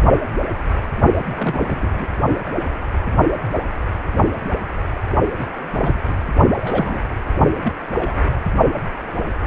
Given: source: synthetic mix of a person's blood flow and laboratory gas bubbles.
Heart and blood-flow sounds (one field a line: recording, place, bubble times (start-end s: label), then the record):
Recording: Doppler ultrasound of blood flow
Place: precordium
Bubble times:
1.27-2.06 s: bubbles
5.38-5.46 s: bubbles
5.74-5.99 s: bubbles
6.08-6.15 s: bubbles
6.57-7.04 s: bubbles
7.64-7.72 s: bubbles
7.92-8.43 s: bubbles
From the record:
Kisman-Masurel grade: 222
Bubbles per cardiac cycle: several, 3 to 8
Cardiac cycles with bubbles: 10 to 50%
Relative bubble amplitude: moderate (0.250 to 0.450)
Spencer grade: 2 (many but less than half of the cardiac periods contain bubble signals, singularly or in groups)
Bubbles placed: only in the low amplitude regions of the cardiac cycle